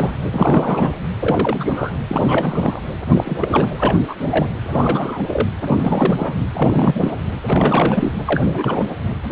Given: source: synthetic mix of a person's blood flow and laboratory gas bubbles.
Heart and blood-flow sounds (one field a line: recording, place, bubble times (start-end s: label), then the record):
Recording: Doppler ultrasound of blood flow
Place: precordium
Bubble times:
0.00-0.11 s: bubbles
0.31-0.92 s: bubbles
1.19-1.92 s: bubbles
2.08-2.81 s: bubbles
3.15-3.69 s: bubbles
3.77-3.99 s: bubbles
4.07-4.15 s: bubbles
4.20-4.49 s: bubbles
4.64-5.22 s: bubbles
5.28-5.47 s: bubbles
5.64-6.38 s: bubbles
6.54-7.14 s: bubbles
7.46-8.12 s: bubbles
8.26-8.86 s: bubbles
9.30-9.32 s: bubbles
From the record:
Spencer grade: 3 (all of the cardiac periods contain showers or single bubble signals, but not dominating or overriding the cardiac motion signals)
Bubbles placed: anywhere in the cardiac cycle